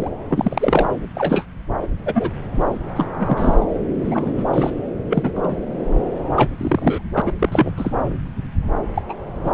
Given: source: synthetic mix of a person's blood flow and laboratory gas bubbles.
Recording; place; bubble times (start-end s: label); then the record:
Doppler ultrasound of blood flow; subclavian vein
0.00-0.10 s: bubbles
0.29-0.94 s: bubbles
1.15-1.45 s: bubbles
1.82-1.87 s: bubbles
2.06-2.31 s: bubbles
2.96-3.65 s: bubbles
4.04-4.32 s: bubbles
4.38-4.43 s: bubbles
4.54-4.71 s: bubbles
5.09-5.31 s: bubbles
5.34-5.61 s: bubbles
6.36-6.49 s: bubbles
6.57-7.01 s: bubbles
7.13-7.33 s: bubbles
7.39-7.49 s: bubbles
7.51-7.71 s: bubbles
7.77-7.91 s: bubbles
8.94-9.02 s: bubbles
9.09-9.14 s: bubbles
9.44-9.51 s: bubbles
From the record:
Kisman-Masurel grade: 242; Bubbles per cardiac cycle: several, 3 to 8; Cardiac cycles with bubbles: 100%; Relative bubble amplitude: moderate (0.250 to 0.450); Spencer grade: 3 (all of the cardiac periods contain showers or single bubble signals, but not dominating or overriding the cardiac motion signals); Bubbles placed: anywhere in the cardiac cycle